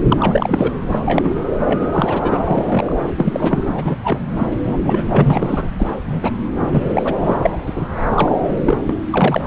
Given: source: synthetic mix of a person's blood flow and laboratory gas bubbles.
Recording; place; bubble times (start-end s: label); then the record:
Doppler ultrasound of blood flow; subclavian vein
0.08-0.73 s: bubbles
0.88-1.29 s: bubbles
1.65-2.43 s: bubbles
2.46-2.96 s: bubbles
3.17-3.63 s: bubbles
3.75-3.96 s: bubbles
4.04-4.19 s: bubbles
4.37-4.48 s: bubbles
4.62-5.04 s: bubbles
5.08-5.69 s: bubbles
5.78-5.96 s: bubbles
6.05-6.19 s: bubbles
6.22-6.30 s: bubbles
6.60-7.15 s: bubbles
7.23-7.39 s: bubbles
7.42-7.57 s: bubbles
7.66-7.86 s: bubbles
8.14-8.29 s: bubbles
8.48-8.58 s: bubbles
8.64-8.77 s: bubbles
8.87-8.94 s: bubbles
9.10-9.41 s: bubbles
From the record:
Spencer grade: 3 (all of the cardiac periods contain showers or single bubble signals, but not dominating or overriding the cardiac motion signals); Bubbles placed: anywhere in the cardiac cycle